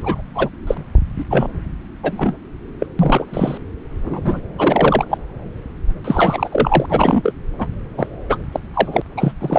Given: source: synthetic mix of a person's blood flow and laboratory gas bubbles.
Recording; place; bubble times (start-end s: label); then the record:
Doppler ultrasound of blood flow; subclavian vein
0.03-0.22 s: bubbles
0.34-0.49 s: bubbles
0.67-0.77 s: bubbles
1.18-1.25 s: bubbles
1.30-1.48 s: bubbles
2.03-2.33 s: bubbles
2.79-2.87 s: bubbles
2.99-3.58 s: bubbles
4.05-4.40 s: bubbles
4.58-5.05 s: bubbles
5.08-5.17 s: bubbles
6.04-6.86 s: bubbles
6.88-7.33 s: bubbles
7.58-7.67 s: bubbles
7.97-8.06 s: bubbles
8.29-8.38 s: bubbles
8.52-8.60 s: bubbles
8.73-9.02 s: bubbles
9.17-9.32 s: bubbles
9.40-9.58 s: bubbles
From the record:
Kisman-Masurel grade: 233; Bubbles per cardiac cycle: several, 3 to 8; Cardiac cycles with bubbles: 50 to 99%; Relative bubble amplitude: loud (0.450 to 0.775); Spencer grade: 3 (all of the cardiac periods contain showers or single bubble signals, but not dominating or overriding the cardiac motion signals); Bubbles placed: anywhere in the cardiac cycle